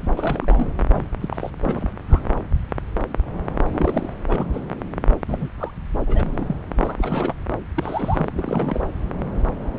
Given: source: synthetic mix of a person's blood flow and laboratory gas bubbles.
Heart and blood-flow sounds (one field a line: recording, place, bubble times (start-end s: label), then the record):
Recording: Doppler ultrasound of blood flow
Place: subclavian vein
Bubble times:
0.00-0.08 s: bubbles
0.17-0.69 s: bubbles
0.91-1.04 s: bubbles
1.21-1.50 s: bubbles
1.63-1.88 s: bubbles
2.09-2.20 s: bubbles
3.68-4.13 s: bubbles
4.29-4.46 s: bubbles
4.53-4.61 s: bubbles
5.28-5.49 s: bubbles
5.58-5.71 s: bubbles
6.07-6.64 s: bubbles
6.79-7.33 s: bubbles
7.77-8.30 s: bubbles
8.34-8.87 s: bubbles
From the record:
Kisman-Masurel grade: 232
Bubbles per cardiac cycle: several, 3 to 8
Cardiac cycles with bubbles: 50 to 99%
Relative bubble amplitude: moderate (0.250 to 0.450)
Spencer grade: 3 (all of the cardiac periods contain showers or single bubble signals, but not dominating or overriding the cardiac motion signals)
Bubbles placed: anywhere in the cardiac cycle